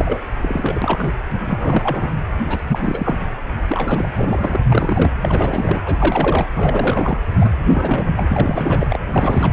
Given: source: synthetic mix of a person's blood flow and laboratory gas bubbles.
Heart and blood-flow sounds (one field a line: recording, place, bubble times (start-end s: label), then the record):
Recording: Doppler ultrasound of blood flow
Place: precordium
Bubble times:
0.00-0.19 s: bubbles
0.41-1.12 s: bubbles
1.46-2.10 s: bubbles
2.48-3.17 s: bubbles
3.68-4.08 s: bubbles
4.16-4.60 s: bubbles
4.71-5.11 s: bubbles
5.21-6.48 s: bubbles
6.56-7.20 s: bubbles
7.41-7.50 s: bubbles
7.67-8.26 s: bubbles
8.29-8.87 s: bubbles
8.89-9.00 s: bubbles
9.09-9.52 s: bubbles
From the record:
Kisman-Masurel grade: 342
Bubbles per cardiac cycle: rolling drumbeat, 9 or more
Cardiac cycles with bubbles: 100%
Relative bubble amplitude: moderate (0.250 to 0.450)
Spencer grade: 3 (all of the cardiac periods contain showers or single bubble signals, but not dominating or overriding the cardiac motion signals)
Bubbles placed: anywhere in the cardiac cycle